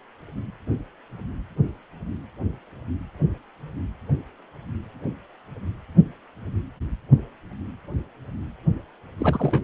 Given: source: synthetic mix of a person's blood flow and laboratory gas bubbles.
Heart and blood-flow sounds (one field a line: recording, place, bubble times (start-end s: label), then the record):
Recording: Doppler ultrasound of blood flow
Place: precordium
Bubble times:
9.18-9.59 s: bubbles
From the record:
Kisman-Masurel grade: 212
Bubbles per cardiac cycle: several, 3 to 8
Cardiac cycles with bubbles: 1 to 10%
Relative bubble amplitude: moderate (0.250 to 0.450)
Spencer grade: 1 (occasional bubble signal discernible with the cardiac motion signal, with majority of cardiac periods free of bubbles)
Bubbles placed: only in the low amplitude regions of the cardiac cycle